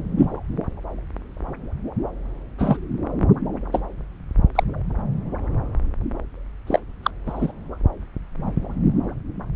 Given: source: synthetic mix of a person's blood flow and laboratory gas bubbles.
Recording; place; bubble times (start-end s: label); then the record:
Doppler ultrasound of blood flow; subclavian vein
0.17-0.28 s: bubbles
2.58-2.77 s: bubbles
3.71-3.81 s: bubbles
4.55-4.63 s: bubbles
6.67-6.79 s: bubbles
7.03-7.11 s: bubbles
7.26-7.52 s: bubbles
From the record:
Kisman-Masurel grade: 123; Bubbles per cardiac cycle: 1 to 2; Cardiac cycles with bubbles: 10 to 50%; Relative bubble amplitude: loud (0.450 to 0.775); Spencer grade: 2 (many but less than half of the cardiac periods contain bubble signals, singularly or in groups); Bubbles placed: anywhere in the cardiac cycle